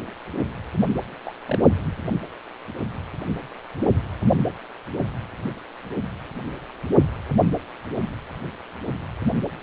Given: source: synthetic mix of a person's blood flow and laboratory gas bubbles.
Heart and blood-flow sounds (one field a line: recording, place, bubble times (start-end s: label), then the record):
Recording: Doppler ultrasound of blood flow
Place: precordium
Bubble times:
1.25-1.33 s: bubbles
1.46-1.58 s: bubbles
From the record:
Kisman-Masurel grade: 111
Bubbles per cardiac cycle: 1 to 2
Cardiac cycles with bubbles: 1 to 10%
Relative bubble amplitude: barely perceptible (0.100 to 0.250)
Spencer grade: 1 (occasional bubble signal discernible with the cardiac motion signal, with majority of cardiac periods free of bubbles)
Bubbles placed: only in the low amplitude regions of the cardiac cycle